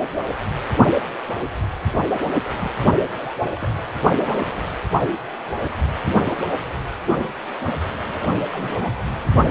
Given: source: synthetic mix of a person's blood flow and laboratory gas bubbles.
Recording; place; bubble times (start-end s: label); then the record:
Doppler ultrasound of blood flow; precordium
2.60-2.71 s: bubbles
3.14-3.35 s: bubbles
3.56-3.73 s: bubbles
4.04-4.38 s: bubbles
4.45-4.63 s: bubbles
6.04-6.35 s: bubbles
6.42-6.53 s: bubbles
8.03-8.14 s: bubbles
8.22-8.28 s: bubbles
8.52-8.91 s: bubbles
From the record:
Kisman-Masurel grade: 221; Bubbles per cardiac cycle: several, 3 to 8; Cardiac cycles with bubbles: 10 to 50%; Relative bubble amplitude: barely perceptible (0.100 to 0.250); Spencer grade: 2 (many but less than half of the cardiac periods contain bubble signals, singularly or in groups); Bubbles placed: anywhere in the cardiac cycle